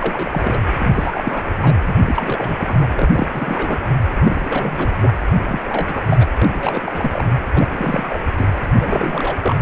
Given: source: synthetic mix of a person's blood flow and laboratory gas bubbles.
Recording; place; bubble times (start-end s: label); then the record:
Doppler ultrasound of blood flow; precordium
0.00-0.59 s: bubbles
0.79-0.91 s: bubbles
0.94-1.55 s: bubbles
1.61-1.79 s: bubbles
1.85-1.95 s: bubbles
2.01-2.86 s: bubbles
2.95-3.27 s: bubbles
3.31-3.89 s: bubbles
4.15-4.88 s: bubbles
5.01-5.14 s: bubbles
5.34-6.06 s: bubbles
6.08-6.26 s: bubbles
6.39-7.25 s: bubbles
7.54-7.67 s: bubbles
7.71-8.19 s: bubbles
8.38-8.51 s: bubbles
8.75-9.38 s: bubbles
9.42-9.56 s: bubbles
From the record:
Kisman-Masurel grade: 342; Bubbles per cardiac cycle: rolling drumbeat, 9 or more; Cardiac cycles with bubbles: 100%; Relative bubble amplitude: moderate (0.250 to 0.450); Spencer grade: 3 (all of the cardiac periods contain showers or single bubble signals, but not dominating or overriding the cardiac motion signals); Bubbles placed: anywhere in the cardiac cycle